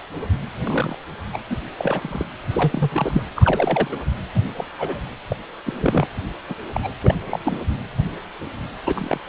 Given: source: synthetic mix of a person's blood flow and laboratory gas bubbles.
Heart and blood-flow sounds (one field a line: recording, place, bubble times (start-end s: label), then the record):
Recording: Doppler ultrasound of blood flow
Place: precordium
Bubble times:
0.65-0.96 s: bubbles
1.33-1.39 s: bubbles
1.50-1.56 s: bubbles
1.79-2.26 s: bubbles
2.50-3.23 s: bubbles
3.36-3.88 s: bubbles
3.92-3.97 s: bubbles
4.34-4.40 s: bubbles
4.56-4.66 s: bubbles
4.78-4.99 s: bubbles
5.29-5.36 s: bubbles
5.65-6.08 s: bubbles
6.49-6.54 s: bubbles
6.74-6.80 s: bubbles
6.83-6.92 s: bubbles
7.01-7.14 s: bubbles
7.26-7.59 s: bubbles
8.86-9.19 s: bubbles
From the record:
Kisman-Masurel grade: 232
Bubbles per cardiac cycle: several, 3 to 8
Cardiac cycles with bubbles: 50 to 99%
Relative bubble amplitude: moderate (0.250 to 0.450)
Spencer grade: 3 (all of the cardiac periods contain showers or single bubble signals, but not dominating or overriding the cardiac motion signals)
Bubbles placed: anywhere in the cardiac cycle